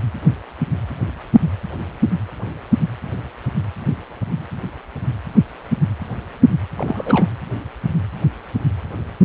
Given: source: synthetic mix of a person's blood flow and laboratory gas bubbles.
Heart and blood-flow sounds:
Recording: Doppler ultrasound of blood flow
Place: precordium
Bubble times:
6.76-7.34 s: bubbles
From the record:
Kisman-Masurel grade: 212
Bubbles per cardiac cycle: several, 3 to 8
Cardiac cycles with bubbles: 1 to 10%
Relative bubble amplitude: moderate (0.250 to 0.450)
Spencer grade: 1 (occasional bubble signal discernible with the cardiac motion signal, with majority of cardiac periods free of bubbles)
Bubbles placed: anywhere in the cardiac cycle

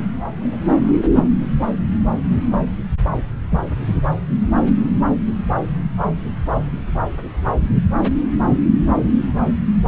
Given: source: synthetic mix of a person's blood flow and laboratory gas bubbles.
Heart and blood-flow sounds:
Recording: Doppler ultrasound of blood flow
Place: subclavian vein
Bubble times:
0.40-0.61 s: bubbles
0.81-0.98 s: bubbles
From the record:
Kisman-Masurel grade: 111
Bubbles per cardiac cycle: 1 to 2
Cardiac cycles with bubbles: 1 to 10%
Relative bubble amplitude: barely perceptible (0.100 to 0.250)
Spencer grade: 1 (occasional bubble signal discernible with the cardiac motion signal, with majority of cardiac periods free of bubbles)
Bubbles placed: anywhere in the cardiac cycle

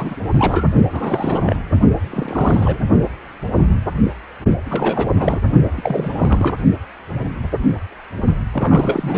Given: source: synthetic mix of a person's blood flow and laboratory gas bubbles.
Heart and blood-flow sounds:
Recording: Doppler ultrasound of blood flow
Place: precordium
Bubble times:
0.00-0.16 s: bubbles
0.20-0.30 s: bubbles
0.33-0.65 s: bubbles
0.92-1.56 s: bubbles
2.10-2.78 s: bubbles
4.68-5.39 s: bubbles
5.76-6.58 s: bubbles
8.53-9.18 s: bubbles
From the record:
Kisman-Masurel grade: 332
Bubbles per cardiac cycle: rolling drumbeat, 9 or more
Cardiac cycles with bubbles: 50 to 99%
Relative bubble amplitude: moderate (0.250 to 0.450)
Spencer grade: 3 (all of the cardiac periods contain showers or single bubble signals, but not dominating or overriding the cardiac motion signals)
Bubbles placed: only in the low amplitude regions of the cardiac cycle

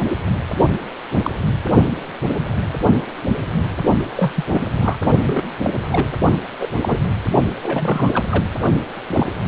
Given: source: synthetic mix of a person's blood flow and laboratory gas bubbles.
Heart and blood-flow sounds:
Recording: Doppler ultrasound of blood flow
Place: precordium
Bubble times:
0.07-0.17 s: bubbles
0.71-0.78 s: bubbles
1.23-1.31 s: bubbles
4.15-4.32 s: bubbles
4.36-4.44 s: bubbles
4.50-4.66 s: bubbles
4.80-4.97 s: bubbles
5.22-5.43 s: bubbles
5.64-5.70 s: bubbles
5.90-6.09 s: bubbles
6.59-6.67 s: bubbles
6.81-6.98 s: bubbles
7.62-8.11 s: bubbles
8.13-8.25 s: bubbles
8.29-8.44 s: bubbles
9.09-9.27 s: bubbles
From the record:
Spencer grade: 3 (all of the cardiac periods contain showers or single bubble signals, but not dominating or overriding the cardiac motion signals)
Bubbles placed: only in the low amplitude regions of the cardiac cycle

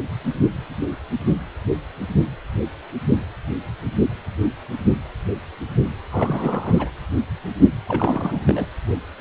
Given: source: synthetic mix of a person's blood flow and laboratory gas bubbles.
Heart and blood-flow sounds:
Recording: Doppler ultrasound of blood flow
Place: precordium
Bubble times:
6.11-6.91 s: bubbles
7.87-8.66 s: bubbles
From the record:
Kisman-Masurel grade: 222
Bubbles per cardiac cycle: several, 3 to 8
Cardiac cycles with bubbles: 10 to 50%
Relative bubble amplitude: moderate (0.250 to 0.450)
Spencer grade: 2 (many but less than half of the cardiac periods contain bubble signals, singularly or in groups)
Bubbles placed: anywhere in the cardiac cycle

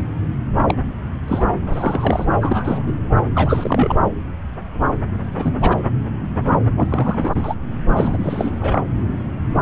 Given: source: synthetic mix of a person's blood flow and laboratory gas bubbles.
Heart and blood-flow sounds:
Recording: Doppler ultrasound of blood flow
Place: subclavian vein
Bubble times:
0.00-0.02 s: bubbles
0.67-0.74 s: bubbles
1.27-1.45 s: bubbles
1.72-2.26 s: bubbles
2.41-2.83 s: bubbles
2.86-2.92 s: bubbles
3.34-3.96 s: bubbles
5.37-5.53 s: bubbles
5.60-5.76 s: bubbles
6.77-7.54 s: bubbles
7.88-8.51 s: bubbles
8.59-8.83 s: bubbles
From the record:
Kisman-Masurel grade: 232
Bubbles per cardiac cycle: several, 3 to 8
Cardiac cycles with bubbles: 50 to 99%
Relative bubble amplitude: moderate (0.250 to 0.450)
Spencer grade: 3 (all of the cardiac periods contain showers or single bubble signals, but not dominating or overriding the cardiac motion signals)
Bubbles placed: anywhere in the cardiac cycle

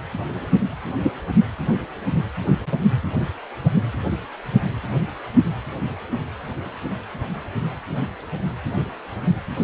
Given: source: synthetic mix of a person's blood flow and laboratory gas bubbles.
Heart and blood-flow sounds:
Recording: Doppler ultrasound of blood flow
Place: precordium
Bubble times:
1.01-1.11 s: bubbles
From the record:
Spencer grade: 1 (occasional bubble signal discernible with the cardiac motion signal, with majority of cardiac periods free of bubbles)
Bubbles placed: anywhere in the cardiac cycle

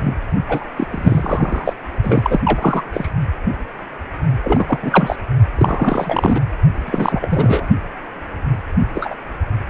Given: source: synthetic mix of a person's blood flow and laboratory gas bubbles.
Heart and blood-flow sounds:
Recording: Doppler ultrasound of blood flow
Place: precordium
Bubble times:
0.03-0.15 s: bubbles
0.49-0.71 s: bubbles
0.77-0.87 s: bubbles
0.91-1.73 s: bubbles
2.03-2.40 s: bubbles
2.44-2.82 s: bubbles
2.93-3.09 s: bubbles
4.43-4.79 s: bubbles
4.82-5.16 s: bubbles
5.55-6.41 s: bubbles
6.85-7.68 s: bubbles
8.95-9.14 s: bubbles
From the record:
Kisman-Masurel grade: 333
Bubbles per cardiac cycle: rolling drumbeat, 9 or more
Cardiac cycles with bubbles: 50 to 99%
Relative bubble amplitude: loud (0.450 to 0.775)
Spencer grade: 3 (all of the cardiac periods contain showers or single bubble signals, but not dominating or overriding the cardiac motion signals)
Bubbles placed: only in the low amplitude regions of the cardiac cycle

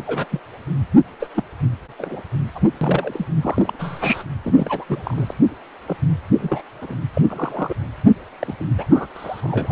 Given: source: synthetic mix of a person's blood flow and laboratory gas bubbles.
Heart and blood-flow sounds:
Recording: Doppler ultrasound of blood flow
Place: precordium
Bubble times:
0.07-0.27 s: bubbles
0.31-0.40 s: bubbles
1.19-1.28 s: bubbles
1.35-1.44 s: bubbles
1.98-2.21 s: bubbles
2.54-2.60 s: bubbles
2.81-3.27 s: bubbles
3.42-3.72 s: bubbles
3.79-4.23 s: bubbles
4.44-4.85 s: bubbles
4.89-5.35 s: bubbles
5.86-5.97 s: bubbles
6.41-6.62 s: bubbles
6.81-6.95 s: bubbles
7.14-7.22 s: bubbles
7.30-7.75 s: bubbles
8.39-8.53 s: bubbles
8.60-8.64 s: bubbles
8.78-8.85 s: bubbles
8.90-9.06 s: bubbles
9.14-9.72 s: bubbles
From the record:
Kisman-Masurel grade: 242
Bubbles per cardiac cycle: several, 3 to 8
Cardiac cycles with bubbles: 100%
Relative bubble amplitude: moderate (0.250 to 0.450)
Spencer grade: 3 (all of the cardiac periods contain showers or single bubble signals, but not dominating or overriding the cardiac motion signals)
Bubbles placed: anywhere in the cardiac cycle

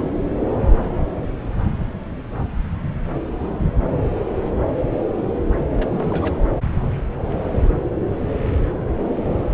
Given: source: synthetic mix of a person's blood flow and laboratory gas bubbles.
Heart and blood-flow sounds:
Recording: Doppler ultrasound of blood flow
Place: subclavian vein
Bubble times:
5.70-6.37 s: bubbles
From the record:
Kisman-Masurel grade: 221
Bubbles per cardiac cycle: several, 3 to 8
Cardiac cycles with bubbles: 10 to 50%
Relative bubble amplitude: barely perceptible (0.100 to 0.250)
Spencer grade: 2 (many but less than half of the cardiac periods contain bubble signals, singularly or in groups)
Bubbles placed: anywhere in the cardiac cycle

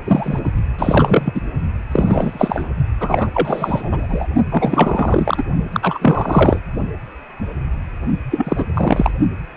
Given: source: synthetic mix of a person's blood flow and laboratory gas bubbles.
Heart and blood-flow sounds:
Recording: Doppler ultrasound of blood flow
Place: precordium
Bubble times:
0.05-0.40 s: bubbles
0.43-0.51 s: bubbles
0.78-1.41 s: bubbles
1.92-2.69 s: bubbles
3.00-3.30 s: bubbles
3.34-4.26 s: bubbles
4.50-5.43 s: bubbles
5.72-5.98 s: bubbles
6.01-6.59 s: bubbles
8.30-8.66 s: bubbles
8.74-9.12 s: bubbles
From the record:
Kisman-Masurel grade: 333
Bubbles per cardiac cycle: rolling drumbeat, 9 or more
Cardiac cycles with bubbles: 50 to 99%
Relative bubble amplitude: loud (0.450 to 0.775)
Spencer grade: 3 (all of the cardiac periods contain showers or single bubble signals, but not dominating or overriding the cardiac motion signals)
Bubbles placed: only in the low amplitude regions of the cardiac cycle

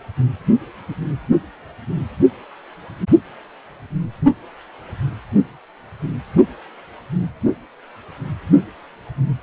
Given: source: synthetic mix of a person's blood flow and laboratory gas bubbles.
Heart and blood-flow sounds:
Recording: Doppler ultrasound of blood flow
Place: precordium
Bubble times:
no bubbles
From the record:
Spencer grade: 0 (complete lack of bubble signals)

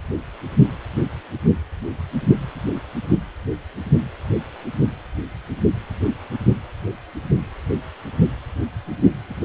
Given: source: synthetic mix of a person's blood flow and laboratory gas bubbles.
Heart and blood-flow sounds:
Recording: Doppler ultrasound of blood flow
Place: precordium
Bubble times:
no bubbles
From the record:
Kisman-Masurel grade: 000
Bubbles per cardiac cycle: 0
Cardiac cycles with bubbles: 0%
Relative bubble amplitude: no bubbles discernible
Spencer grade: 0 (complete lack of bubble signals)

